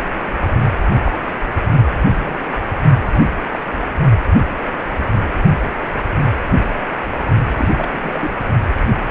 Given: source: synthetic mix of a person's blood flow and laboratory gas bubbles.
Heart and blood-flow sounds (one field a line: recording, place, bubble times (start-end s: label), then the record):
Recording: Doppler ultrasound of blood flow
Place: precordium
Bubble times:
1.04-1.12 s: bubbles
1.72-1.87 s: bubbles
2.19-2.37 s: bubbles
3.06-3.10 s: bubbles
3.14-3.28 s: bubbles
3.43-3.48 s: bubbles
3.53-3.58 s: bubbles
7.54-7.68 s: bubbles
7.74-7.89 s: bubbles
7.93-8.31 s: bubbles
From the record:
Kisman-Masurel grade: 221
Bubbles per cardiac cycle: several, 3 to 8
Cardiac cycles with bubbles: 10 to 50%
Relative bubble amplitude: barely perceptible (0.100 to 0.250)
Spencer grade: 2 (many but less than half of the cardiac periods contain bubble signals, singularly or in groups)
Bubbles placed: only in the low amplitude regions of the cardiac cycle